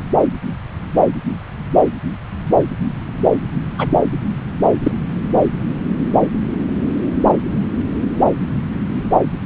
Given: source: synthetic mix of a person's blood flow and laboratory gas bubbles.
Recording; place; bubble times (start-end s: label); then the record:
Doppler ultrasound of blood flow; subclavian vein
3.78-3.88 s: bubbles
4.83-4.92 s: bubbles
From the record:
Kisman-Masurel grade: 123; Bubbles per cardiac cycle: 1 to 2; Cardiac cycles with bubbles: 10 to 50%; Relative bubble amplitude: loud (0.450 to 0.775); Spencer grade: 2 (many but less than half of the cardiac periods contain bubble signals, singularly or in groups); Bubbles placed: anywhere in the cardiac cycle